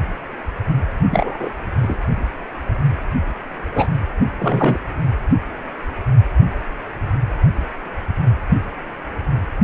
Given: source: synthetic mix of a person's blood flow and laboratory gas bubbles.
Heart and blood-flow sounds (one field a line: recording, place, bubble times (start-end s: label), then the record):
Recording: Doppler ultrasound of blood flow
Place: precordium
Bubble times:
1.10-1.50 s: bubbles
1.82-1.98 s: bubbles
3.75-3.88 s: bubbles
4.38-4.78 s: bubbles
From the record:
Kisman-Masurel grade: 123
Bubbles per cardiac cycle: 1 to 2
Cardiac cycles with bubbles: 10 to 50%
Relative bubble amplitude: loud (0.450 to 0.775)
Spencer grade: 2 (many but less than half of the cardiac periods contain bubble signals, singularly or in groups)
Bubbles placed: anywhere in the cardiac cycle